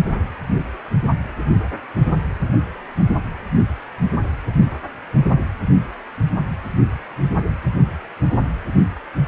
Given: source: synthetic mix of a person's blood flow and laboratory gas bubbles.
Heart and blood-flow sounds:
Doppler ultrasound of blood flow; precordium
no bubbles
From the record:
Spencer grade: 0 (complete lack of bubble signals)

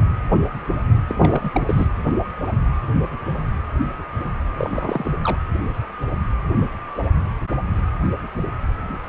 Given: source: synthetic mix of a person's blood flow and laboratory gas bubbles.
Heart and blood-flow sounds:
Doppler ultrasound of blood flow; precordium
1.08-1.50 s: bubbles
1.54-1.89 s: bubbles
4.58-5.12 s: bubbles
5.23-5.38 s: bubbles
From the record:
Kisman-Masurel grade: 222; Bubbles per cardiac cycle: several, 3 to 8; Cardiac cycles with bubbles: 10 to 50%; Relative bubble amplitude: moderate (0.250 to 0.450); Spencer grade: 2 (many but less than half of the cardiac periods contain bubble signals, singularly or in groups); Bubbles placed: anywhere in the cardiac cycle

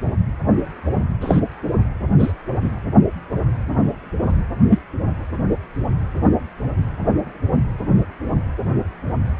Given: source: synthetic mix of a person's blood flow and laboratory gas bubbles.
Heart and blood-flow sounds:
Doppler ultrasound of blood flow; precordium
1.21-1.40 s: bubbles
2.19-2.32 s: bubbles
2.61-2.71 s: bubbles
4.70-4.79 s: bubbles
From the record:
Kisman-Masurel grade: 123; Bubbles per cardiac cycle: 1 to 2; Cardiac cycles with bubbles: 10 to 50%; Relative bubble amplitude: loud (0.450 to 0.775); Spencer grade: 2 (many but less than half of the cardiac periods contain bubble signals, singularly or in groups); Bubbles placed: anywhere in the cardiac cycle

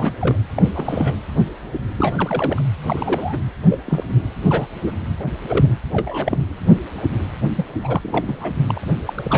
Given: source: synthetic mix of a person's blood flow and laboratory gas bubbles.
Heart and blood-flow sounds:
Doppler ultrasound of blood flow; precordium
0.00-0.13 s: bubbles
0.21-0.37 s: bubbles
0.57-0.70 s: bubbles
0.76-1.15 s: bubbles
1.96-2.62 s: bubbles
2.84-3.38 s: bubbles
3.69-3.79 s: bubbles
3.84-4.04 s: bubbles
4.49-4.67 s: bubbles
4.86-4.92 s: bubbles
5.17-5.34 s: bubbles
5.49-5.67 s: bubbles
5.92-6.38 s: bubbles
7.57-7.65 s: bubbles
7.83-8.53 s: bubbles
8.67-8.86 s: bubbles
9.07-9.13 s: bubbles
9.18-9.38 s: bubbles
From the record:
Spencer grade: 3 (all of the cardiac periods contain showers or single bubble signals, but not dominating or overriding the cardiac motion signals); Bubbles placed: anywhere in the cardiac cycle

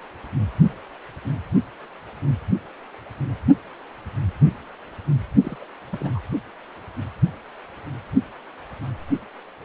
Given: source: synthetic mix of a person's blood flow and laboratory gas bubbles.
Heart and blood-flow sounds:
Doppler ultrasound of blood flow; precordium
5.41-5.58 s: bubbles
5.61-5.64 s: bubbles
5.89-6.10 s: bubbles
6.14-6.19 s: bubbles
From the record:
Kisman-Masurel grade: 211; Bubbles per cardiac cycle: several, 3 to 8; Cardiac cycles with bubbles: 1 to 10%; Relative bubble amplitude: barely perceptible (0.100 to 0.250); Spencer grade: 1 (occasional bubble signal discernible with the cardiac motion signal, with majority of cardiac periods free of bubbles); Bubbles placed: only in the low amplitude regions of the cardiac cycle

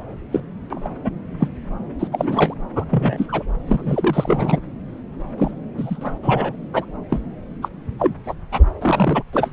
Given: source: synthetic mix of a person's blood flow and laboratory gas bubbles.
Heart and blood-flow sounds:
Doppler ultrasound of blood flow; subclavian vein
0.32-0.40 s: bubbles
0.70-0.88 s: bubbles
1.04-1.10 s: bubbles
1.40-1.48 s: bubbles
1.99-2.07 s: bubbles
2.12-2.54 s: bubbles
2.75-2.85 s: bubbles
2.90-3.26 s: bubbles
3.28-3.43 s: bubbles
3.67-4.60 s: bubbles
5.38-5.51 s: bubbles
5.77-6.14 s: bubbles
6.22-6.54 s: bubbles
6.72-6.85 s: bubbles
7.09-7.19 s: bubbles
7.62-7.68 s: bubbles
7.99-8.14 s: bubbles
8.25-8.34 s: bubbles
8.52-8.64 s: bubbles
8.81-9.23 s: bubbles
9.33-9.53 s: bubbles
From the record:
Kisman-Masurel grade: 242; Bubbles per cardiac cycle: several, 3 to 8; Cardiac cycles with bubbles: 100%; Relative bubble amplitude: moderate (0.250 to 0.450); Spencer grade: 3 (all of the cardiac periods contain showers or single bubble signals, but not dominating or overriding the cardiac motion signals); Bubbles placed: anywhere in the cardiac cycle

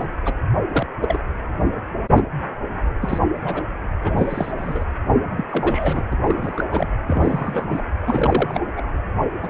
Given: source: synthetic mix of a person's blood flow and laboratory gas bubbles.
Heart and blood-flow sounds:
Doppler ultrasound of blood flow; precordium
0.00-0.07 s: bubbles
0.24-0.34 s: bubbles
0.73-0.87 s: bubbles
1.00-1.19 s: bubbles
2.08-2.23 s: bubbles
3.02-3.19 s: bubbles
3.36-3.62 s: bubbles
4.04-4.51 s: bubbles
4.57-4.84 s: bubbles
5.36-5.46 s: bubbles
5.50-6.02 s: bubbles
6.12-6.17 s: bubbles
6.25-6.64 s: bubbles
6.71-6.91 s: bubbles
7.07-7.67 s: bubbles
7.71-7.81 s: bubbles
8.06-8.61 s: bubbles
8.77-8.83 s: bubbles
9.41-9.50 s: bubbles
From the record:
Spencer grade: 3 (all of the cardiac periods contain showers or single bubble signals, but not dominating or overriding the cardiac motion signals); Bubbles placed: anywhere in the cardiac cycle

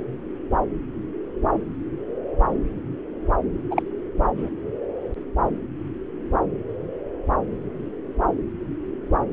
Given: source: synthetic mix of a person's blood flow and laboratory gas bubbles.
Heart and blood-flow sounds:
Doppler ultrasound of blood flow; subclavian vein
3.71-3.83 s: bubbles
4.38-4.49 s: bubbles
From the record:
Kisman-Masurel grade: 212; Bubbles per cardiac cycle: several, 3 to 8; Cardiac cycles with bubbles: 1 to 10%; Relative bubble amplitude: moderate (0.250 to 0.450); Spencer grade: 1 (occasional bubble signal discernible with the cardiac motion signal, with majority of cardiac periods free of bubbles); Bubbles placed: anywhere in the cardiac cycle

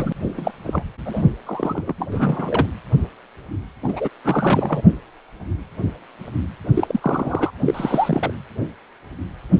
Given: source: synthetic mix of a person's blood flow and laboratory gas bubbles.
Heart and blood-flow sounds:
Doppler ultrasound of blood flow; precordium
0.00-0.12 s: bubbles
0.34-0.51 s: bubbles
0.67-0.82 s: bubbles
1.05-1.24 s: bubbles
1.46-1.93 s: bubbles
1.98-2.67 s: bubbles
3.82-4.09 s: bubbles
4.24-4.81 s: bubbles
6.74-7.50 s: bubbles
7.64-8.32 s: bubbles
From the record:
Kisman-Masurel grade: 222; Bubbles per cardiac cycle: several, 3 to 8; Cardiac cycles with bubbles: 10 to 50%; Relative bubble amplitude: moderate (0.250 to 0.450); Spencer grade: 2 (many but less than half of the cardiac periods contain bubble signals, singularly or in groups); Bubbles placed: anywhere in the cardiac cycle

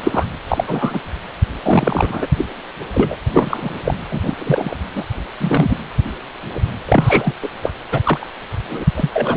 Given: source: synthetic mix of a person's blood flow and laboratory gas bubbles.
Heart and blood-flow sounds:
Doppler ultrasound of blood flow; precordium
0.00-0.27 s: bubbles
0.48-0.64 s: bubbles
0.67-0.99 s: bubbles
1.63-2.27 s: bubbles
2.38-2.46 s: bubbles
2.94-3.16 s: bubbles
3.33-3.73 s: bubbles
3.85-3.94 s: bubbles
4.09-4.34 s: bubbles
4.38-4.76 s: bubbles
4.96-5.04 s: bubbles
5.39-5.77 s: bubbles
6.52-6.60 s: bubbles
6.85-7.34 s: bubbles
7.42-7.49 s: bubbles
7.62-7.71 s: bubbles
7.91-8.00 s: bubbles
8.03-8.27 s: bubbles
8.69-8.84 s: bubbles
8.95-9.09 s: bubbles
9.13-9.36 s: bubbles
From the record:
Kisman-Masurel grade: 243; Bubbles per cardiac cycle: several, 3 to 8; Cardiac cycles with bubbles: 100%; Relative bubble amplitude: loud (0.450 to 0.775); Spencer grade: 3 (all of the cardiac periods contain showers or single bubble signals, but not dominating or overriding the cardiac motion signals); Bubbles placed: anywhere in the cardiac cycle

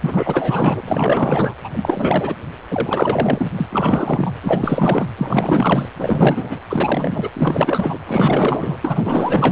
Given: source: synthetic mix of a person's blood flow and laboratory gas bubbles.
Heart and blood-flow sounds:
Doppler ultrasound of blood flow; precordium
0.01-0.81 s: bubbles
0.87-1.54 s: bubbles
1.64-2.34 s: bubbles
2.71-3.51 s: bubbles
3.56-3.67 s: bubbles
3.70-4.33 s: bubbles
4.42-5.06 s: bubbles
5.17-5.88 s: bubbles
5.97-6.60 s: bubbles
6.69-7.29 s: bubbles
7.34-8.00 s: bubbles
8.07-8.78 s: bubbles
8.82-9.52 s: bubbles
From the record:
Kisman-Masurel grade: 444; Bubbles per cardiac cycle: continuous sound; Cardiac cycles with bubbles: 100%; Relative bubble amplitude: maximal (0.775 to 0.999); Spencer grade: 4 (maximum detectable bubble signal sounding continuously throughout systole and diastole of every cardiac period, and overriding the amplitude of the normal cardiac signals); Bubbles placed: anywhere in the cardiac cycle

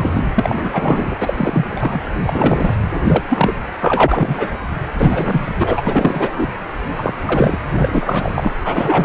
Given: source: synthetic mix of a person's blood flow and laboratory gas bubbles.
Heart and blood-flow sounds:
Doppler ultrasound of blood flow; precordium
0.00-0.10 s: bubbles
0.14-1.17 s: bubbles
1.20-1.33 s: bubbles
1.36-2.00 s: bubbles
2.23-2.75 s: bubbles
2.95-3.00 s: bubbles
3.06-3.23 s: bubbles
3.29-3.56 s: bubbles
3.81-4.58 s: bubbles
4.98-5.51 s: bubbles
5.59-5.82 s: bubbles
5.85-6.54 s: bubbles
6.96-7.13 s: bubbles
7.25-7.58 s: bubbles
7.70-8.52 s: bubbles
8.64-9.05 s: bubbles
From the record:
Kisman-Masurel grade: 343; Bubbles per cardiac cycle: rolling drumbeat, 9 or more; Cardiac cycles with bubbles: 100%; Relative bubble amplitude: loud (0.450 to 0.775); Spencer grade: 3 (all of the cardiac periods contain showers or single bubble signals, but not dominating or overriding the cardiac motion signals); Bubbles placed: anywhere in the cardiac cycle

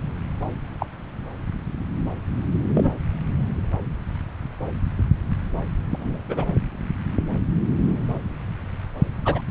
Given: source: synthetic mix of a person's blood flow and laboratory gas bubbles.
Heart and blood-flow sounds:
Doppler ultrasound of blood flow; subclavian vein
0.79-0.86 s: bubbles
2.75-2.98 s: bubbles
5.90-6.22 s: bubbles
6.29-6.46 s: bubbles
9.25-9.42 s: bubbles
From the record:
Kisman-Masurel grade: 122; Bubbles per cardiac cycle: 1 to 2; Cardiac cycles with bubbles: 10 to 50%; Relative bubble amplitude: moderate (0.250 to 0.450); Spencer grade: 2 (many but less than half of the cardiac periods contain bubble signals, singularly or in groups); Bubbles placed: anywhere in the cardiac cycle

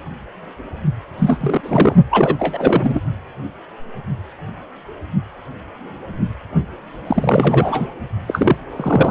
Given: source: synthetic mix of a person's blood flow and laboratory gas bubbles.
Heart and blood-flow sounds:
Doppler ultrasound of blood flow; precordium
1.19-1.95 s: bubbles
2.11-2.37 s: bubbles
2.39-3.00 s: bubbles
7.07-7.88 s: bubbles
8.27-8.56 s: bubbles
8.77-9.11 s: bubbles
From the record:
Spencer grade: 3 (all of the cardiac periods contain showers or single bubble signals, but not dominating or overriding the cardiac motion signals); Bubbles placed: anywhere in the cardiac cycle

